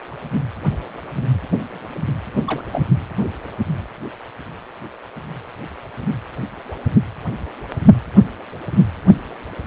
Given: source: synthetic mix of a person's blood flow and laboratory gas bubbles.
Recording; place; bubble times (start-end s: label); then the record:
Doppler ultrasound of blood flow; precordium
2.47-2.62 s: bubbles
2.72-2.84 s: bubbles
From the record:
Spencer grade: 1 (occasional bubble signal discernible with the cardiac motion signal, with majority of cardiac periods free of bubbles); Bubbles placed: anywhere in the cardiac cycle